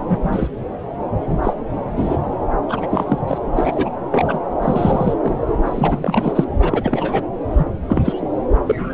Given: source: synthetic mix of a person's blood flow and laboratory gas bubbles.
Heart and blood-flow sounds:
Doppler ultrasound of blood flow; subclavian vein
0.00-0.48 s: bubbles
1.43-1.53 s: bubbles
1.97-2.18 s: bubbles
2.69-2.87 s: bubbles
2.89-3.18 s: bubbles
3.27-3.38 s: bubbles
3.55-3.92 s: bubbles
4.11-4.38 s: bubbles
4.62-5.14 s: bubbles
5.22-5.38 s: bubbles
5.65-6.44 s: bubbles
6.59-7.26 s: bubbles
7.58-7.65 s: bubbles
7.88-8.02 s: bubbles
8.04-8.13 s: bubbles
8.66-8.92 s: bubbles
From the record:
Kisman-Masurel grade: 233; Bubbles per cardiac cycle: several, 3 to 8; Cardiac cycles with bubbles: 50 to 99%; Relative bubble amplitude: loud (0.450 to 0.775); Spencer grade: 3 (all of the cardiac periods contain showers or single bubble signals, but not dominating or overriding the cardiac motion signals); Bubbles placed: anywhere in the cardiac cycle

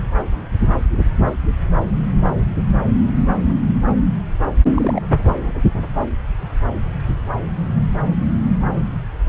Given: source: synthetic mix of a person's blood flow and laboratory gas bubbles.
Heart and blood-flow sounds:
Doppler ultrasound of blood flow; subclavian vein
2.23-2.31 s: bubbles
2.37-2.46 s: bubbles
4.74-5.02 s: bubbles
From the record:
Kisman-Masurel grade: 122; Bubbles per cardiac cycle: 1 to 2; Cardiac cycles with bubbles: 10 to 50%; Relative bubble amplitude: moderate (0.250 to 0.450); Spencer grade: 2 (many but less than half of the cardiac periods contain bubble signals, singularly or in groups); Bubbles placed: anywhere in the cardiac cycle

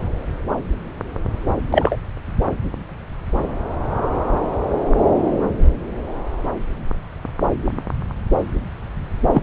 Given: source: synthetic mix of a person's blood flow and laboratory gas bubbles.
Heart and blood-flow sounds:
Doppler ultrasound of blood flow; subclavian vein
1.71-1.96 s: bubbles
9.34-9.42 s: bubbles
From the record:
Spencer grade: 2 (many but less than half of the cardiac periods contain bubble signals, singularly or in groups); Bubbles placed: anywhere in the cardiac cycle

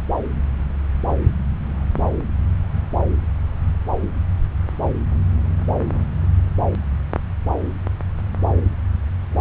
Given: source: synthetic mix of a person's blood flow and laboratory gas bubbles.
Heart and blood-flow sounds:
Doppler ultrasound of blood flow; subclavian vein
no bubbles
From the record:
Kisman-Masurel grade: 000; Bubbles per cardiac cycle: 0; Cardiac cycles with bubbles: 0%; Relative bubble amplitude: no bubbles discernible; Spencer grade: 0 (complete lack of bubble signals)

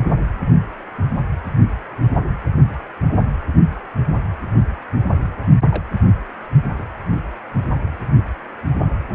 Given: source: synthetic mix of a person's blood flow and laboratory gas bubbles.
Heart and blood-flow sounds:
Doppler ultrasound of blood flow; precordium
5.70-5.83 s: bubbles
6.78-6.82 s: bubbles
From the record:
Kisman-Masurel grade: 111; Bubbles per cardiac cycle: 1 to 2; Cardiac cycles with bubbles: 1 to 10%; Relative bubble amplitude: barely perceptible (0.100 to 0.250); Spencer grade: 1 (occasional bubble signal discernible with the cardiac motion signal, with majority of cardiac periods free of bubbles); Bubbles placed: anywhere in the cardiac cycle

